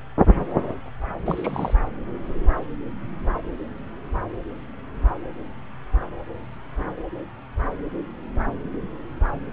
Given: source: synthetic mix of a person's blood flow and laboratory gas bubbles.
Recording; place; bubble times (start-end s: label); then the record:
Doppler ultrasound of blood flow; subclavian vein
1.26-1.74 s: bubbles
From the record:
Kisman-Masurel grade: 211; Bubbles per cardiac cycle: several, 3 to 8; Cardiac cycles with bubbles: 1 to 10%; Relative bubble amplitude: barely perceptible (0.100 to 0.250); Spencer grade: 1 (occasional bubble signal discernible with the cardiac motion signal, with majority of cardiac periods free of bubbles); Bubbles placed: anywhere in the cardiac cycle